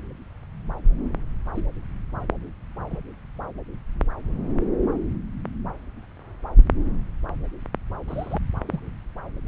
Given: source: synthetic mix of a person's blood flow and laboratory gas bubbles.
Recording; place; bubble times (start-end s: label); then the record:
Doppler ultrasound of blood flow; subclavian vein
1.55-1.65 s: bubbles
2.90-2.98 s: bubbles
8.08-8.38 s: bubbles
8.65-8.79 s: bubbles
9.46-9.48 s: bubbles
From the record:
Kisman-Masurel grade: 121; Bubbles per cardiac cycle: 1 to 2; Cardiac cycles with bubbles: 10 to 50%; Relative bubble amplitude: barely perceptible (0.100 to 0.250); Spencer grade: 2 (many but less than half of the cardiac periods contain bubble signals, singularly or in groups); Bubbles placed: anywhere in the cardiac cycle